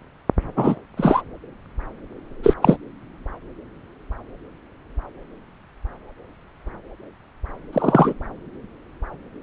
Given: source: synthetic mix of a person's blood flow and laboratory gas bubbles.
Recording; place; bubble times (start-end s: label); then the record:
Doppler ultrasound of blood flow; subclavian vein
0.56-0.75 s: bubbles
0.97-1.23 s: bubbles
2.42-2.54 s: bubbles
2.62-2.77 s: bubbles
7.73-8.14 s: bubbles
From the record:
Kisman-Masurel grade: 223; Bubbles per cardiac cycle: several, 3 to 8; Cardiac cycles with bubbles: 10 to 50%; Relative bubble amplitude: loud (0.450 to 0.775); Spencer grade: 2 (many but less than half of the cardiac periods contain bubble signals, singularly or in groups); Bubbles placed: anywhere in the cardiac cycle